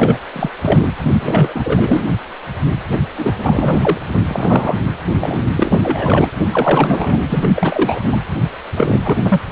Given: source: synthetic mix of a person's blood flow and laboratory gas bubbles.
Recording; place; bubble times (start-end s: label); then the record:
Doppler ultrasound of blood flow; precordium
0.00-0.17 s: bubbles
0.33-0.49 s: bubbles
0.61-0.87 s: bubbles
0.98-1.12 s: bubbles
1.19-2.10 s: bubbles
2.90-2.99 s: bubbles
3.17-3.36 s: bubbles
3.38-3.98 s: bubbles
4.12-4.21 s: bubbles
4.28-4.79 s: bubbles
5.21-5.47 s: bubbles
5.56-6.29 s: bubbles
6.44-7.20 s: bubbles
7.29-7.52 s: bubbles
7.54-8.18 s: bubbles
8.75-9.00 s: bubbles
9.03-9.17 s: bubbles
9.21-9.41 s: bubbles
From the record:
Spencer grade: 3 (all of the cardiac periods contain showers or single bubble signals, but not dominating or overriding the cardiac motion signals); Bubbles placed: anywhere in the cardiac cycle